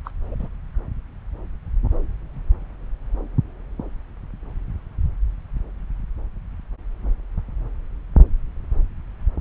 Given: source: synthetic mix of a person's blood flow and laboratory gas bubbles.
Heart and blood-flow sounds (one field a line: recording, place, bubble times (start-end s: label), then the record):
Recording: Doppler ultrasound of blood flow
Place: subclavian vein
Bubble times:
0.04-0.10 s: bubbles
0.31-0.35 s: bubbles
0.39-0.48 s: bubbles
From the record:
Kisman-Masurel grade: 211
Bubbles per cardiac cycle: several, 3 to 8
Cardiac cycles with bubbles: 1 to 10%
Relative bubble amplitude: barely perceptible (0.100 to 0.250)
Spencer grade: 1 (occasional bubble signal discernible with the cardiac motion signal, with majority of cardiac periods free of bubbles)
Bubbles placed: anywhere in the cardiac cycle